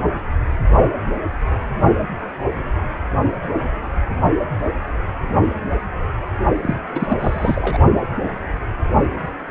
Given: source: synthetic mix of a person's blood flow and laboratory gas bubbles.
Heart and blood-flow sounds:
Doppler ultrasound of blood flow; precordium
6.62-6.79 s: bubbles
6.95-7.16 s: bubbles
7.19-7.79 s: bubbles
From the record:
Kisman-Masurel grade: 212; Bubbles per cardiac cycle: several, 3 to 8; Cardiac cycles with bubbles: 1 to 10%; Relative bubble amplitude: moderate (0.250 to 0.450); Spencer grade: 1 (occasional bubble signal discernible with the cardiac motion signal, with majority of cardiac periods free of bubbles); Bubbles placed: only in the low amplitude regions of the cardiac cycle

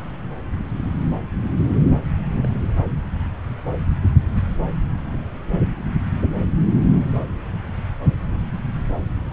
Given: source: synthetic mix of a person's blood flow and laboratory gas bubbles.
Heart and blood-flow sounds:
Doppler ultrasound of blood flow; subclavian vein
2.33-2.48 s: bubbles
From the record:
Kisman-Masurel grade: 111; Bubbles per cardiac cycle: 1 to 2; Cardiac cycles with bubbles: 1 to 10%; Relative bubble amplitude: barely perceptible (0.100 to 0.250); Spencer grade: 1 (occasional bubble signal discernible with the cardiac motion signal, with majority of cardiac periods free of bubbles); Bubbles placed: anywhere in the cardiac cycle

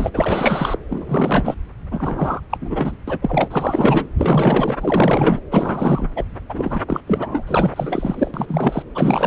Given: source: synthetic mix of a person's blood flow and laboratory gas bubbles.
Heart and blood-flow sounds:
Doppler ultrasound of blood flow; subclavian vein
0.00-0.10 s: bubbles
0.14-0.78 s: bubbles
0.89-1.55 s: bubbles
1.91-2.41 s: bubbles
2.50-2.58 s: bubbles
2.60-2.96 s: bubbles
3.08-3.19 s: bubbles
3.21-3.48 s: bubbles
3.50-4.08 s: bubbles
4.18-5.39 s: bubbles
5.50-6.08 s: bubbles
6.16-6.24 s: bubbles
6.49-6.82 s: bubbles
6.88-7.01 s: bubbles
7.07-7.43 s: bubbles
7.47-8.31 s: bubbles
8.34-8.82 s: bubbles
8.95-9.27 s: bubbles
From the record:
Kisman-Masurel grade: 444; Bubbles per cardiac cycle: continuous sound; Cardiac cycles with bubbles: 100%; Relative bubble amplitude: maximal (0.775 to 0.999); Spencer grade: 4 (maximum detectable bubble signal sounding continuously throughout systole and diastole of every cardiac period, and overriding the amplitude of the normal cardiac signals); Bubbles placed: anywhere in the cardiac cycle

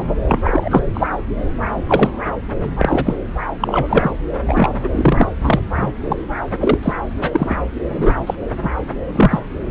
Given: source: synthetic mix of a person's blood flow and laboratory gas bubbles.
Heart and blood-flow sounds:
Doppler ultrasound of blood flow; subclavian vein
0.00-0.04 s: bubbles
0.25-0.85 s: bubbles
0.94-1.07 s: bubbles
1.89-2.10 s: bubbles
2.77-3.15 s: bubbles
3.60-4.11 s: bubbles
4.47-4.70 s: bubbles
4.83-4.89 s: bubbles
4.92-5.27 s: bubbles
5.44-5.61 s: bubbles
5.75-5.94 s: bubbles
6.04-6.22 s: bubbles
6.61-6.78 s: bubbles
6.83-6.93 s: bubbles
7.22-7.56 s: bubbles
7.89-8.16 s: bubbles
8.25-8.35 s: bubbles
8.62-8.71 s: bubbles
9.15-9.39 s: bubbles
From the record:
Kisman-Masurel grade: 233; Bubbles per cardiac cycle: several, 3 to 8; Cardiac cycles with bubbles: 50 to 99%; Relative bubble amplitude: loud (0.450 to 0.775); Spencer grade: 3 (all of the cardiac periods contain showers or single bubble signals, but not dominating or overriding the cardiac motion signals); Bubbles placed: anywhere in the cardiac cycle

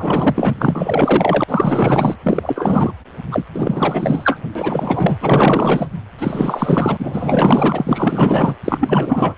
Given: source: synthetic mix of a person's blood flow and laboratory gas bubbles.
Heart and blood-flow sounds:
Doppler ultrasound of blood flow; precordium
0.00-0.54 s: bubbles
0.58-1.44 s: bubbles
1.48-2.16 s: bubbles
2.23-2.93 s: bubbles
3.31-3.46 s: bubbles
3.54-4.38 s: bubbles
4.55-5.17 s: bubbles
5.20-5.87 s: bubbles
6.19-8.55 s: bubbles
8.64-9.35 s: bubbles
From the record:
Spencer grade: 4 (maximum detectable bubble signal sounding continuously throughout systole and diastole of every cardiac period, and overriding the amplitude of the normal cardiac signals); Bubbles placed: anywhere in the cardiac cycle

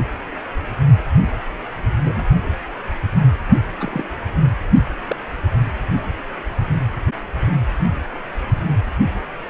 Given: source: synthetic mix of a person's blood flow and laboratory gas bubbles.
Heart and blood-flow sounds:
Doppler ultrasound of blood flow; precordium
2.04-2.24 s: bubbles
3.80-4.05 s: bubbles
5.09-5.16 s: bubbles
From the record:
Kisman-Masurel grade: 121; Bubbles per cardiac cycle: 1 to 2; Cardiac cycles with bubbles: 10 to 50%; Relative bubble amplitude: barely perceptible (0.100 to 0.250); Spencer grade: 2 (many but less than half of the cardiac periods contain bubble signals, singularly or in groups); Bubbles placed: anywhere in the cardiac cycle

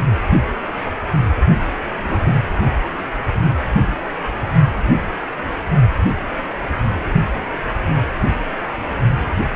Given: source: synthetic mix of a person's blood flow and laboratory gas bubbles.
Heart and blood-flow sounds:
Doppler ultrasound of blood flow; precordium
2.04-2.17 s: bubbles
2.23-2.36 s: bubbles
From the record:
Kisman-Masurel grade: 112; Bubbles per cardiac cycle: 1 to 2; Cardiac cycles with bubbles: 1 to 10%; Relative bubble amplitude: moderate (0.250 to 0.450); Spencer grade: 1 (occasional bubble signal discernible with the cardiac motion signal, with majority of cardiac periods free of bubbles); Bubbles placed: only in the low amplitude regions of the cardiac cycle

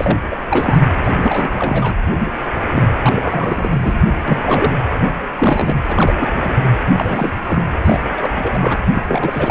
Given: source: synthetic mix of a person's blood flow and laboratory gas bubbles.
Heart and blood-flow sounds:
Doppler ultrasound of blood flow; precordium
0.00-0.18 s: bubbles
0.30-0.40 s: bubbles
0.50-0.78 s: bubbles
1.04-1.94 s: bubbles
2.75-2.84 s: bubbles
3.02-4.02 s: bubbles
4.27-4.73 s: bubbles
5.38-5.76 s: bubbles
5.88-6.14 s: bubbles
6.21-6.54 s: bubbles
6.61-6.71 s: bubbles
6.96-7.42 s: bubbles
7.45-7.62 s: bubbles
7.83-8.00 s: bubbles
8.04-8.77 s: bubbles
8.92-9.03 s: bubbles
9.07-9.51 s: bubbles
From the record:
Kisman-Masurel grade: 342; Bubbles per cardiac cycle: rolling drumbeat, 9 or more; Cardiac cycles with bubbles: 100%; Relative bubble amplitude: moderate (0.250 to 0.450); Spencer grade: 3 (all of the cardiac periods contain showers or single bubble signals, but not dominating or overriding the cardiac motion signals); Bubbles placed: anywhere in the cardiac cycle

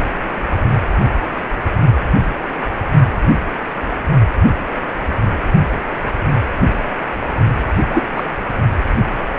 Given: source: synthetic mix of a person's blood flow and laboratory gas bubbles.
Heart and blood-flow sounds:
Doppler ultrasound of blood flow; precordium
7.90-8.03 s: bubbles
8.15-8.23 s: bubbles
From the record:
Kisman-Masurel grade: 213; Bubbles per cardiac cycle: several, 3 to 8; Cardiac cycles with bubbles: 1 to 10%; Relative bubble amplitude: loud (0.450 to 0.775); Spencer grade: 1 (occasional bubble signal discernible with the cardiac motion signal, with majority of cardiac periods free of bubbles); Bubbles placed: only in the low amplitude regions of the cardiac cycle

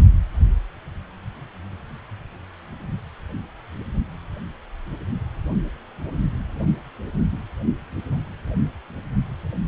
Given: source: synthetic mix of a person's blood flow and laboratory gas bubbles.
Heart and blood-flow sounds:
Doppler ultrasound of blood flow; precordium
no bubbles
From the record:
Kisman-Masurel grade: 000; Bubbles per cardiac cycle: 0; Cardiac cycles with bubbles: 0%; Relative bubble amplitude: no bubbles discernible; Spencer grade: 0 (complete lack of bubble signals)

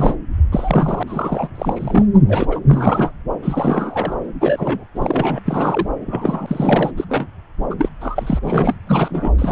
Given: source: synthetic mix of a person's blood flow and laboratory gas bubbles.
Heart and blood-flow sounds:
Doppler ultrasound of blood flow; subclavian vein
0.00-0.17 s: bubbles
0.52-1.03 s: bubbles
1.06-1.49 s: bubbles
1.54-2.06 s: bubbles
2.13-2.21 s: bubbles
2.29-2.59 s: bubbles
2.68-3.12 s: bubbles
3.42-4.16 s: bubbles
4.41-4.85 s: bubbles
4.96-5.41 s: bubbles
5.46-5.87 s: bubbles
6.06-6.91 s: bubbles
6.97-7.05 s: bubbles
7.09-7.27 s: bubbles
7.70-7.75 s: bubbles
7.78-7.89 s: bubbles
8.01-8.39 s: bubbles
8.42-8.76 s: bubbles
8.87-9.30 s: bubbles
9.38-9.52 s: bubbles
From the record:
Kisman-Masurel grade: 242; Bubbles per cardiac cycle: several, 3 to 8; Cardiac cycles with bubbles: 100%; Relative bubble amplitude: moderate (0.250 to 0.450); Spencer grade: 3 (all of the cardiac periods contain showers or single bubble signals, but not dominating or overriding the cardiac motion signals); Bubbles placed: anywhere in the cardiac cycle

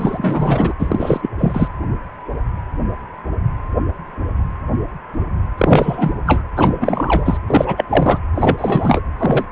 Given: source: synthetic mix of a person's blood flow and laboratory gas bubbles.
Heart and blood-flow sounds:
Doppler ultrasound of blood flow; precordium
0.00-0.73 s: bubbles
0.79-1.29 s: bubbles
1.39-1.69 s: bubbles
5.58-6.14 s: bubbles
6.26-6.43 s: bubbles
6.56-7.38 s: bubbles
7.47-7.85 s: bubbles
7.90-8.19 s: bubbles
8.35-9.00 s: bubbles
9.19-9.45 s: bubbles
From the record:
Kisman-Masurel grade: 333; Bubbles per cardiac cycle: rolling drumbeat, 9 or more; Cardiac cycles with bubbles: 50 to 99%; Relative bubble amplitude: loud (0.450 to 0.775); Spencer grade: 3 (all of the cardiac periods contain showers or single bubble signals, but not dominating or overriding the cardiac motion signals); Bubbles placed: anywhere in the cardiac cycle

